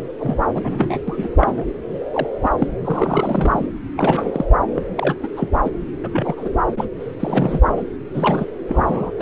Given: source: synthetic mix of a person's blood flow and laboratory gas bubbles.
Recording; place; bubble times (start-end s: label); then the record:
Doppler ultrasound of blood flow; subclavian vein
0.20-0.39 s: bubbles
0.54-0.98 s: bubbles
1.07-1.29 s: bubbles
1.40-1.66 s: bubbles
2.12-2.27 s: bubbles
2.43-2.48 s: bubbles
2.58-2.67 s: bubbles
2.84-3.67 s: bubbles
3.96-4.46 s: bubbles
4.75-4.82 s: bubbles
4.97-5.16 s: bubbles
5.23-5.28 s: bubbles
5.37-5.48 s: bubbles
5.65-5.71 s: bubbles
6.03-6.08 s: bubbles
6.13-6.49 s: bubbles
6.77-6.85 s: bubbles
7.20-7.61 s: bubbles
7.67-7.82 s: bubbles
8.13-8.45 s: bubbles
8.69-9.12 s: bubbles
9.18-9.21 s: bubbles
From the record:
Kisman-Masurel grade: 242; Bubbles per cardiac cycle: several, 3 to 8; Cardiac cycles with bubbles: 100%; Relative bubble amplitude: moderate (0.250 to 0.450); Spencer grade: 3 (all of the cardiac periods contain showers or single bubble signals, but not dominating or overriding the cardiac motion signals); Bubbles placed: anywhere in the cardiac cycle